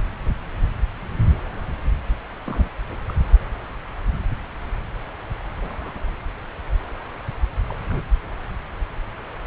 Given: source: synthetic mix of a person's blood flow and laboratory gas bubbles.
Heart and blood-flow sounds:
Doppler ultrasound of blood flow; subclavian vein
2.46-2.73 s: bubbles
2.89-2.96 s: bubbles
3.08-3.14 s: bubbles
5.61-6.01 s: bubbles
6.07-6.10 s: bubbles
7.68-7.75 s: bubbles
7.88-8.04 s: bubbles
From the record:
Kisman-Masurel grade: 121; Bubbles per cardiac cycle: 1 to 2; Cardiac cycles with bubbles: 10 to 50%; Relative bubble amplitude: barely perceptible (0.100 to 0.250); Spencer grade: 2 (many but less than half of the cardiac periods contain bubble signals, singularly or in groups); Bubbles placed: anywhere in the cardiac cycle

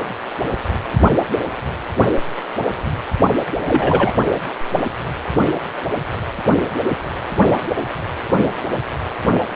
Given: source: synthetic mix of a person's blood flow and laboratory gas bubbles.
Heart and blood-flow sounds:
Doppler ultrasound of blood flow; precordium
3.67-4.12 s: bubbles
From the record:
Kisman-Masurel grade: 123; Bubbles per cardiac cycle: 1 to 2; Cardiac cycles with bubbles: 10 to 50%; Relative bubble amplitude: loud (0.450 to 0.775); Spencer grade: 2 (many but less than half of the cardiac periods contain bubble signals, singularly or in groups); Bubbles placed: only in the low amplitude regions of the cardiac cycle

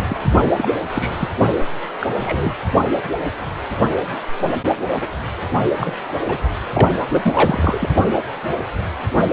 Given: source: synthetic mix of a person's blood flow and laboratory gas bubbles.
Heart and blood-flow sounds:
Doppler ultrasound of blood flow; precordium
0.00-0.18 s: bubbles
0.57-0.69 s: bubbles
0.89-1.29 s: bubbles
2.00-2.08 s: bubbles
2.19-2.56 s: bubbles
5.01-5.07 s: bubbles
5.77-5.92 s: bubbles
6.28-6.38 s: bubbles
6.73-6.92 s: bubbles
7.08-7.90 s: bubbles
From the record:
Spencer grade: 3 (all of the cardiac periods contain showers or single bubble signals, but not dominating or overriding the cardiac motion signals); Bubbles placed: only in the low amplitude regions of the cardiac cycle

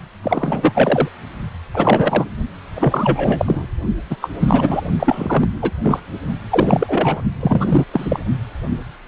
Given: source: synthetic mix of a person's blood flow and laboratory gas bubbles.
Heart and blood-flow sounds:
Doppler ultrasound of blood flow; precordium
0.23-1.08 s: bubbles
1.74-2.25 s: bubbles
2.76-3.66 s: bubbles
4.10-4.16 s: bubbles
4.21-4.29 s: bubbles
4.40-4.81 s: bubbles
4.99-5.48 s: bubbles
5.62-5.71 s: bubbles
5.83-6.00 s: bubbles
6.50-7.21 s: bubbles
7.40-7.85 s: bubbles
7.93-8.20 s: bubbles
From the record:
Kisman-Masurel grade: 333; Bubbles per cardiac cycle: rolling drumbeat, 9 or more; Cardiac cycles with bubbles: 50 to 99%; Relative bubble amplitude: loud (0.450 to 0.775); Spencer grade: 3 (all of the cardiac periods contain showers or single bubble signals, but not dominating or overriding the cardiac motion signals); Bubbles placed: only in the low amplitude regions of the cardiac cycle

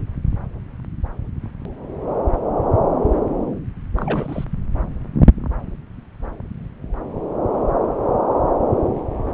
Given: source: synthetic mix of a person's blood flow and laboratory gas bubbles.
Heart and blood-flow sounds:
Doppler ultrasound of blood flow; subclavian vein
3.95-4.45 s: bubbles
From the record:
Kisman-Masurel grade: 211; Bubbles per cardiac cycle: several, 3 to 8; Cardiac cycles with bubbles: 1 to 10%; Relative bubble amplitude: barely perceptible (0.100 to 0.250); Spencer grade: 1 (occasional bubble signal discernible with the cardiac motion signal, with majority of cardiac periods free of bubbles); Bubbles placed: anywhere in the cardiac cycle

